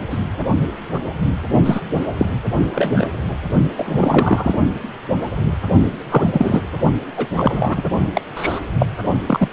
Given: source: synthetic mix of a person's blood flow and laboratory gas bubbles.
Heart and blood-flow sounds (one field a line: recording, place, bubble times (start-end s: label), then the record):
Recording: Doppler ultrasound of blood flow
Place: precordium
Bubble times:
0.10-0.18 s: bubbles
1.66-1.81 s: bubbles
2.18-2.29 s: bubbles
2.73-3.07 s: bubbles
3.76-4.60 s: bubbles
6.11-6.62 s: bubbles
7.17-7.27 s: bubbles
7.36-7.83 s: bubbles
8.14-8.21 s: bubbles
8.35-8.60 s: bubbles
8.78-8.86 s: bubbles
9.26-9.48 s: bubbles
From the record:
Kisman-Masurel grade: 233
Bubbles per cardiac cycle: several, 3 to 8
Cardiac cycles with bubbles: 50 to 99%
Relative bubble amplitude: loud (0.450 to 0.775)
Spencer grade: 3 (all of the cardiac periods contain showers or single bubble signals, but not dominating or overriding the cardiac motion signals)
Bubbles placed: only in the low amplitude regions of the cardiac cycle